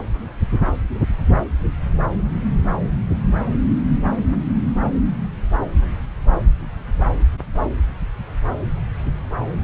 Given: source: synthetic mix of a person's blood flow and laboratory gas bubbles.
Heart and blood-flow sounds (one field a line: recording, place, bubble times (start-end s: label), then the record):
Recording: Doppler ultrasound of blood flow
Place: subclavian vein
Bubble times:
no bubbles
From the record:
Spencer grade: 0 (complete lack of bubble signals)